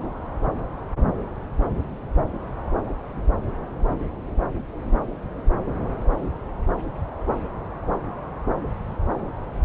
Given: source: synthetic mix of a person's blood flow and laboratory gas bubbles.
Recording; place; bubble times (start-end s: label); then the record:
Doppler ultrasound of blood flow; subclavian vein
no bubbles
From the record:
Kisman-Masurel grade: 000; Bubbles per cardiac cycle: 0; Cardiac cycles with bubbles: 0%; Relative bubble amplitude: no bubbles discernible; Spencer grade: 0 (complete lack of bubble signals)